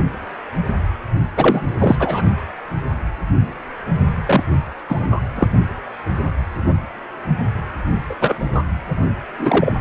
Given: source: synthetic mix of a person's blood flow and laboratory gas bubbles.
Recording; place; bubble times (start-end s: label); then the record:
Doppler ultrasound of blood flow; precordium
1.37-1.61 s: bubbles
1.79-1.96 s: bubbles
2.00-2.21 s: bubbles
4.25-4.43 s: bubbles
4.89-5.06 s: bubbles
5.11-5.20 s: bubbles
5.35-5.48 s: bubbles
8.10-8.15 s: bubbles
8.20-8.36 s: bubbles
8.54-8.62 s: bubbles
9.39-9.73 s: bubbles
From the record:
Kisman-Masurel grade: 223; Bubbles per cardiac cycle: several, 3 to 8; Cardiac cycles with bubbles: 10 to 50%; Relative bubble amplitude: loud (0.450 to 0.775); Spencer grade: 2 (many but less than half of the cardiac periods contain bubble signals, singularly or in groups); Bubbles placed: only in the low amplitude regions of the cardiac cycle